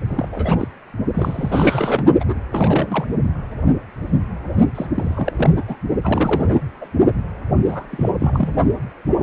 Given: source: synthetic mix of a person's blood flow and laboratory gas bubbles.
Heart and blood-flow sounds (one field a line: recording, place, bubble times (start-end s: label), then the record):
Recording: Doppler ultrasound of blood flow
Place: precordium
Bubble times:
0.07-0.28 s: bubbles
0.32-0.68 s: bubbles
1.15-2.06 s: bubbles
2.20-2.25 s: bubbles
2.28-2.35 s: bubbles
2.52-3.07 s: bubbles
4.75-4.87 s: bubbles
4.95-5.33 s: bubbles
5.36-5.54 s: bubbles
5.57-5.65 s: bubbles
5.67-5.76 s: bubbles
6.03-6.58 s: bubbles
6.80-6.87 s: bubbles
7.67-7.86 s: bubbles
7.90-8.09 s: bubbles
8.19-8.55 s: bubbles
From the record:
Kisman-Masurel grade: 332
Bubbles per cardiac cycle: rolling drumbeat, 9 or more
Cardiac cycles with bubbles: 50 to 99%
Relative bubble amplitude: moderate (0.250 to 0.450)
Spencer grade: 3 (all of the cardiac periods contain showers or single bubble signals, but not dominating or overriding the cardiac motion signals)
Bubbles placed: only in the low amplitude regions of the cardiac cycle